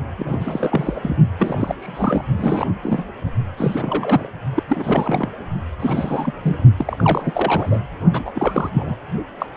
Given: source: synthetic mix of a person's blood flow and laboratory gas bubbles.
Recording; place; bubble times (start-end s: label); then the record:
Doppler ultrasound of blood flow; precordium
0.17-1.17 s: bubbles
1.38-1.75 s: bubbles
1.79-2.25 s: bubbles
2.39-2.71 s: bubbles
2.83-3.06 s: bubbles
3.56-4.30 s: bubbles
4.55-4.63 s: bubbles
4.67-5.28 s: bubbles
5.80-6.32 s: bubbles
6.42-6.57 s: bubbles
6.76-7.79 s: bubbles
8.12-8.31 s: bubbles
8.34-8.70 s: bubbles
8.73-8.95 s: bubbles
9.38-9.46 s: bubbles
9.55-9.57 s: bubbles
From the record:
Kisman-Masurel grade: 342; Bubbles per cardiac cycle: rolling drumbeat, 9 or more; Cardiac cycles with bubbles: 100%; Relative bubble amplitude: moderate (0.250 to 0.450); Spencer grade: 3 (all of the cardiac periods contain showers or single bubble signals, but not dominating or overriding the cardiac motion signals); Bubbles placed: only in the low amplitude regions of the cardiac cycle